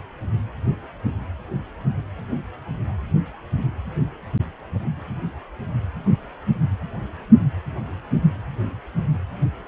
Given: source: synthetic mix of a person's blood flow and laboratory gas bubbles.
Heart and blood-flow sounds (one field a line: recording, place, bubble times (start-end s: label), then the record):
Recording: Doppler ultrasound of blood flow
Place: precordium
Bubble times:
no bubbles
From the record:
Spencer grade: 0 (complete lack of bubble signals)